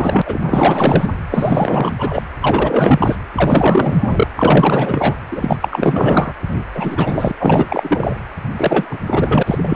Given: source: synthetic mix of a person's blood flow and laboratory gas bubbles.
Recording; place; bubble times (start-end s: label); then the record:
Doppler ultrasound of blood flow; precordium
0.00-0.22 s: bubbles
0.26-1.10 s: bubbles
1.29-1.94 s: bubbles
1.98-2.22 s: bubbles
2.42-3.16 s: bubbles
3.35-4.28 s: bubbles
4.36-5.16 s: bubbles
5.31-5.58 s: bubbles
5.61-6.33 s: bubbles
6.49-6.62 s: bubbles
6.75-7.33 s: bubbles
7.40-8.17 s: bubbles
8.56-8.99 s: bubbles
9.06-9.43 s: bubbles
9.46-9.75 s: bubbles
From the record:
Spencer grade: 4 (maximum detectable bubble signal sounding continuously throughout systole and diastole of every cardiac period, and overriding the amplitude of the normal cardiac signals); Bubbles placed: anywhere in the cardiac cycle